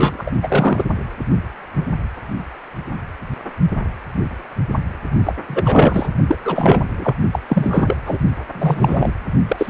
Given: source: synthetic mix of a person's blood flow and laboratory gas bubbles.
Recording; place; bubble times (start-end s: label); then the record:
Doppler ultrasound of blood flow; precordium
0.00-0.23 s: bubbles
0.26-0.31 s: bubbles
0.43-0.84 s: bubbles
5.25-5.33 s: bubbles
5.48-5.62 s: bubbles
5.64-6.10 s: bubbles
6.27-6.37 s: bubbles
6.44-7.16 s: bubbles
7.33-7.39 s: bubbles
7.48-7.96 s: bubbles
8.05-8.19 s: bubbles
8.54-9.13 s: bubbles
9.47-9.70 s: bubbles
From the record:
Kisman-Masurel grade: 333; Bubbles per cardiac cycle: rolling drumbeat, 9 or more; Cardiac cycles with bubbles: 50 to 99%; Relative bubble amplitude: loud (0.450 to 0.775); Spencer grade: 3 (all of the cardiac periods contain showers or single bubble signals, but not dominating or overriding the cardiac motion signals); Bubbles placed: only in the low amplitude regions of the cardiac cycle